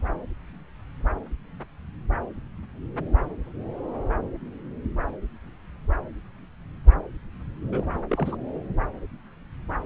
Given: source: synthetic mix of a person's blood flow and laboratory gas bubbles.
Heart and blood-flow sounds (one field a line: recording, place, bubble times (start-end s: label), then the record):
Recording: Doppler ultrasound of blood flow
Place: subclavian vein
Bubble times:
7.71-7.83 s: bubbles
8.09-8.36 s: bubbles
From the record:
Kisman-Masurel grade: 211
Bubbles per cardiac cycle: several, 3 to 8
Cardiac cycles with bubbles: 1 to 10%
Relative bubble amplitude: barely perceptible (0.100 to 0.250)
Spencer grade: 1 (occasional bubble signal discernible with the cardiac motion signal, with majority of cardiac periods free of bubbles)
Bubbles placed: anywhere in the cardiac cycle